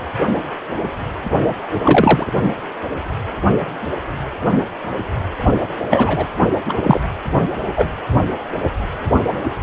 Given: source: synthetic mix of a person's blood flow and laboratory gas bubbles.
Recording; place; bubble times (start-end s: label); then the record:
Doppler ultrasound of blood flow; precordium
1.74-2.32 s: bubbles
5.90-6.26 s: bubbles
6.65-7.00 s: bubbles
7.75-7.90 s: bubbles
From the record:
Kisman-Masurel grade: 223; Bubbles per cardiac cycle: several, 3 to 8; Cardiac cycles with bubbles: 10 to 50%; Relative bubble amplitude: loud (0.450 to 0.775); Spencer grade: 2 (many but less than half of the cardiac periods contain bubble signals, singularly or in groups); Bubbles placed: only in the low amplitude regions of the cardiac cycle